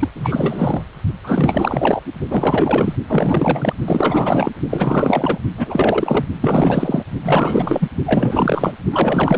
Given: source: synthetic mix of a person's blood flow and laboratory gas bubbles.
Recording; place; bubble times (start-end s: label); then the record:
Doppler ultrasound of blood flow; precordium
0.00-0.10 s: bubbles
0.15-1.01 s: bubbles
1.24-2.01 s: bubbles
2.28-2.96 s: bubbles
3.07-3.74 s: bubbles
3.85-4.52 s: bubbles
4.70-5.38 s: bubbles
5.57-6.25 s: bubbles
6.41-7.04 s: bubbles
7.25-7.88 s: bubbles
8.05-8.72 s: bubbles
8.92-9.38 s: bubbles
From the record:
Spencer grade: 4 (maximum detectable bubble signal sounding continuously throughout systole and diastole of every cardiac period, and overriding the amplitude of the normal cardiac signals); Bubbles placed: only in the low amplitude regions of the cardiac cycle